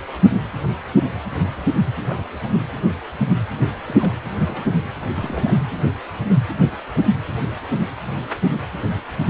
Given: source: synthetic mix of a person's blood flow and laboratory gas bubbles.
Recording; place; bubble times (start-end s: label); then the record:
Doppler ultrasound of blood flow; precordium
2.05-2.24 s: bubbles
2.29-2.39 s: bubbles
3.85-4.14 s: bubbles
4.36-4.65 s: bubbles
5.01-5.05 s: bubbles
5.15-5.61 s: bubbles
From the record:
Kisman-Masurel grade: 221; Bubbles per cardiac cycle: several, 3 to 8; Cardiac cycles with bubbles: 10 to 50%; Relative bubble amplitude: barely perceptible (0.100 to 0.250); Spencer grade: 2 (many but less than half of the cardiac periods contain bubble signals, singularly or in groups); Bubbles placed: anywhere in the cardiac cycle